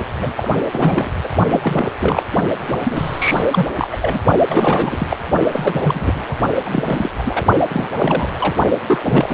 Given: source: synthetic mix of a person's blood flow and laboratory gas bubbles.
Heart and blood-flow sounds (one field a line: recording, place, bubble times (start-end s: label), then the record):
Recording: Doppler ultrasound of blood flow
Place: precordium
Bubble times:
0.19-0.32 s: bubbles
0.37-0.51 s: bubbles
0.71-1.12 s: bubbles
1.23-1.28 s: bubbles
1.50-1.88 s: bubbles
2.00-2.23 s: bubbles
2.60-3.42 s: bubbles
3.52-3.71 s: bubbles
3.78-3.88 s: bubbles
3.92-3.96 s: bubbles
4.01-4.19 s: bubbles
4.49-5.07 s: bubbles
5.10-5.17 s: bubbles
5.51-6.24 s: bubbles
6.29-6.37 s: bubbles
6.64-7.10 s: bubbles
7.17-7.23 s: bubbles
7.25-7.46 s: bubbles
7.70-7.87 s: bubbles
7.94-8.30 s: bubbles
8.34-8.56 s: bubbles
8.87-8.99 s: bubbles
9.05-9.34 s: bubbles
From the record:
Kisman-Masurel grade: 342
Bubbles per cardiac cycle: rolling drumbeat, 9 or more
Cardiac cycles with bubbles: 100%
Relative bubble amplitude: moderate (0.250 to 0.450)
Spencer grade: 3 (all of the cardiac periods contain showers or single bubble signals, but not dominating or overriding the cardiac motion signals)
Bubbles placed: only in the low amplitude regions of the cardiac cycle